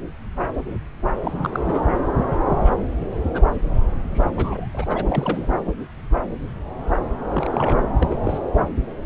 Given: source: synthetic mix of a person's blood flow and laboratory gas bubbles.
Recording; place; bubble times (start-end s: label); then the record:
Doppler ultrasound of blood flow; subclavian vein
1.22-1.85 s: bubbles
2.60-2.74 s: bubbles
3.30-3.42 s: bubbles
4.10-4.26 s: bubbles
4.37-4.68 s: bubbles
4.73-5.04 s: bubbles
5.09-5.48 s: bubbles
7.33-7.79 s: bubbles
8.00-8.20 s: bubbles
8.23-8.39 s: bubbles
From the record:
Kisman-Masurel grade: 222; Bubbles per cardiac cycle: several, 3 to 8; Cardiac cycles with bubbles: 10 to 50%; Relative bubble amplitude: moderate (0.250 to 0.450); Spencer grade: 2 (many but less than half of the cardiac periods contain bubble signals, singularly or in groups); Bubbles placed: anywhere in the cardiac cycle